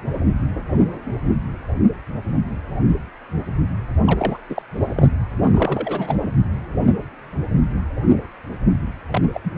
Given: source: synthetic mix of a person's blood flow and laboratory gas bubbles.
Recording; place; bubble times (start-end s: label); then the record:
Doppler ultrasound of blood flow; precordium
4.05-4.38 s: bubbles
4.49-4.62 s: bubbles
4.78-5.09 s: bubbles
5.42-6.15 s: bubbles
6.22-6.29 s: bubbles
9.10-9.22 s: bubbles
9.33-9.40 s: bubbles
9.44-9.51 s: bubbles
From the record:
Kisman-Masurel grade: 222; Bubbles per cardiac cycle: several, 3 to 8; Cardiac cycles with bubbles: 10 to 50%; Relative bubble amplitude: moderate (0.250 to 0.450); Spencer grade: 2 (many but less than half of the cardiac periods contain bubble signals, singularly or in groups); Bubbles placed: anywhere in the cardiac cycle